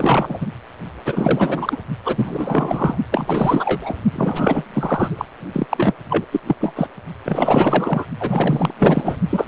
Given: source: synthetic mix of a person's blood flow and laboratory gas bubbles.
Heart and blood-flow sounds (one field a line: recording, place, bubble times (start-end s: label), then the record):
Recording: Doppler ultrasound of blood flow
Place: precordium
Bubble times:
0.00-0.38 s: bubbles
0.41-0.47 s: bubbles
1.05-1.78 s: bubbles
2.04-2.96 s: bubbles
3.11-3.94 s: bubbles
4.12-4.65 s: bubbles
4.73-5.25 s: bubbles
5.53-5.67 s: bubbles
5.70-5.94 s: bubbles
6.09-6.25 s: bubbles
6.32-6.40 s: bubbles
6.47-6.56 s: bubbles
6.60-6.88 s: bubbles
7.25-8.06 s: bubbles
8.19-8.74 s: bubbles
8.79-9.16 s: bubbles
9.29-9.48 s: bubbles
From the record:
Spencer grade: 4 (maximum detectable bubble signal sounding continuously throughout systole and diastole of every cardiac period, and overriding the amplitude of the normal cardiac signals)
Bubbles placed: only in the low amplitude regions of the cardiac cycle